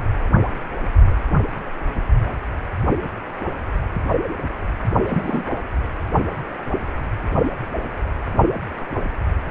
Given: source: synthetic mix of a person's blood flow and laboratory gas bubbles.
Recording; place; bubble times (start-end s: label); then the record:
Doppler ultrasound of blood flow; precordium
5.06-5.43 s: bubbles
From the record:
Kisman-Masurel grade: 113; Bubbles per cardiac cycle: 1 to 2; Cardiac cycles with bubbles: 1 to 10%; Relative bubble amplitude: loud (0.450 to 0.775); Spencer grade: 1 (occasional bubble signal discernible with the cardiac motion signal, with majority of cardiac periods free of bubbles); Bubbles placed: only in the low amplitude regions of the cardiac cycle